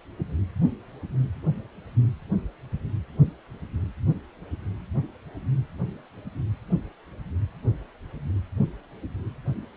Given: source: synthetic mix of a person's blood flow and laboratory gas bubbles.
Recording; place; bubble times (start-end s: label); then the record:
Doppler ultrasound of blood flow; precordium
no bubbles
From the record:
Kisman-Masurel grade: 000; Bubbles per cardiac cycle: 0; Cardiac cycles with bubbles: 0%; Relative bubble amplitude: no bubbles discernible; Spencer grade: 0 (complete lack of bubble signals)